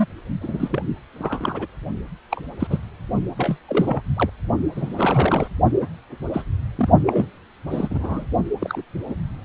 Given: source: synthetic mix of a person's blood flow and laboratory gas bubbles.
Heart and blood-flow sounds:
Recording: Doppler ultrasound of blood flow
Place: precordium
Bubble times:
0.00-0.06 s: bubbles
0.41-0.82 s: bubbles
1.14-1.67 s: bubbles
2.31-2.41 s: bubbles
2.60-2.67 s: bubbles
2.70-2.78 s: bubbles
3.37-3.56 s: bubbles
3.68-4.01 s: bubbles
4.16-4.29 s: bubbles
4.76-5.48 s: bubbles
5.80-5.88 s: bubbles
6.33-6.44 s: bubbles
6.77-6.89 s: bubbles
7.06-7.26 s: bubbles
7.71-8.25 s: bubbles
8.61-8.82 s: bubbles
9.08-9.14 s: bubbles
From the record:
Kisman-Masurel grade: 242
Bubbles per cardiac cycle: several, 3 to 8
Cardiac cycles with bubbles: 100%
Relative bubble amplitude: moderate (0.250 to 0.450)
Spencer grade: 3 (all of the cardiac periods contain showers or single bubble signals, but not dominating or overriding the cardiac motion signals)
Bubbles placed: only in the low amplitude regions of the cardiac cycle

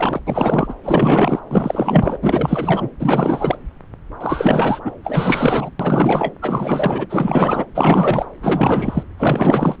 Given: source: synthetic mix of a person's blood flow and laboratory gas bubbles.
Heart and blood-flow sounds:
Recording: Doppler ultrasound of blood flow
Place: subclavian vein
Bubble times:
0.00-0.20 s: bubbles
0.27-0.74 s: bubbles
0.83-1.41 s: bubbles
1.50-2.17 s: bubbles
2.21-2.89 s: bubbles
2.99-3.57 s: bubbles
4.21-4.80 s: bubbles
4.84-4.94 s: bubbles
5.04-5.71 s: bubbles
5.79-6.34 s: bubbles
6.42-7.07 s: bubbles
7.09-7.66 s: bubbles
7.75-8.26 s: bubbles
8.41-9.03 s: bubbles
9.18-9.76 s: bubbles
From the record:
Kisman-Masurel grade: 444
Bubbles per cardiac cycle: continuous sound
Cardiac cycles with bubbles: 100%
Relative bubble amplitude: maximal (0.775 to 0.999)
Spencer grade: 4 (maximum detectable bubble signal sounding continuously throughout systole and diastole of every cardiac period, and overriding the amplitude of the normal cardiac signals)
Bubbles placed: anywhere in the cardiac cycle

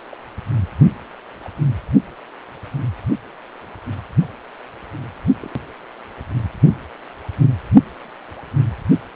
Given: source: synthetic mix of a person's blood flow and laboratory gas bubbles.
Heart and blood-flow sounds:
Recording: Doppler ultrasound of blood flow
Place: precordium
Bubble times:
0.11-0.16 s: bubbles
1.44-1.49 s: bubbles
5.41-5.48 s: bubbles
5.50-5.53 s: bubbles
From the record:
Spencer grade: 2 (many but less than half of the cardiac periods contain bubble signals, singularly or in groups)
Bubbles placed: only in the low amplitude regions of the cardiac cycle

